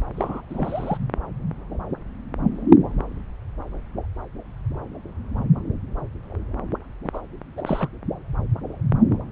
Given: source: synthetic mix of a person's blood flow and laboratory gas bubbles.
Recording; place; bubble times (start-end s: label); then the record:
Doppler ultrasound of blood flow; subclavian vein
0.15-0.42 s: bubbles
0.49-0.97 s: bubbles
7.04-7.09 s: bubbles
7.13-7.19 s: bubbles
7.57-7.62 s: bubbles
7.65-7.89 s: bubbles
From the record:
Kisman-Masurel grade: 221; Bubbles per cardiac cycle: several, 3 to 8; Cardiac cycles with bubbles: 10 to 50%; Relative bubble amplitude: barely perceptible (0.100 to 0.250); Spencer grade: 2 (many but less than half of the cardiac periods contain bubble signals, singularly or in groups); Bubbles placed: anywhere in the cardiac cycle